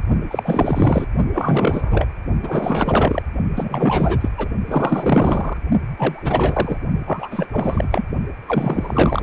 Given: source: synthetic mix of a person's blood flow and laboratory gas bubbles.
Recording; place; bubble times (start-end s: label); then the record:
Doppler ultrasound of blood flow; precordium
0.31-1.07 s: bubbles
1.32-2.06 s: bubbles
2.42-3.23 s: bubbles
3.54-4.29 s: bubbles
4.38-4.49 s: bubbles
4.66-5.57 s: bubbles
5.97-6.78 s: bubbles
7.07-7.47 s: bubbles
7.53-7.88 s: bubbles
7.91-8.05 s: bubbles
8.47-9.23 s: bubbles
From the record:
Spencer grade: 4 (maximum detectable bubble signal sounding continuously throughout systole and diastole of every cardiac period, and overriding the amplitude of the normal cardiac signals); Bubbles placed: only in the low amplitude regions of the cardiac cycle